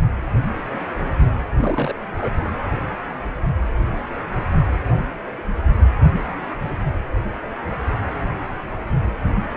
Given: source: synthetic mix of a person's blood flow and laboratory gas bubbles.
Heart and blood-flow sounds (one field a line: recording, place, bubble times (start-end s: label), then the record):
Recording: Doppler ultrasound of blood flow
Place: precordium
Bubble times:
1.58-1.94 s: bubbles
2.13-2.30 s: bubbles
From the record:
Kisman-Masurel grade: 122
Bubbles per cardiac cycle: 1 to 2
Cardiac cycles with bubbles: 10 to 50%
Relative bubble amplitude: moderate (0.250 to 0.450)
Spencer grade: 2 (many but less than half of the cardiac periods contain bubble signals, singularly or in groups)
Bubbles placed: anywhere in the cardiac cycle